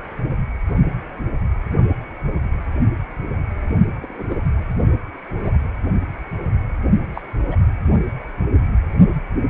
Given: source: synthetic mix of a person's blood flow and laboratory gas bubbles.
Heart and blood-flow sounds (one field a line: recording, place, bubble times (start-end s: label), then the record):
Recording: Doppler ultrasound of blood flow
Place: precordium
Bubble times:
4.01-4.35 s: bubbles
5.38-5.57 s: bubbles
7.13-7.21 s: bubbles
7.51-7.56 s: bubbles
From the record:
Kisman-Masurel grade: 121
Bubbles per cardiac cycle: 1 to 2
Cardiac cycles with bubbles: 10 to 50%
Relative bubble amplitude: barely perceptible (0.100 to 0.250)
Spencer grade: 2 (many but less than half of the cardiac periods contain bubble signals, singularly or in groups)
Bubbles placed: only in the low amplitude regions of the cardiac cycle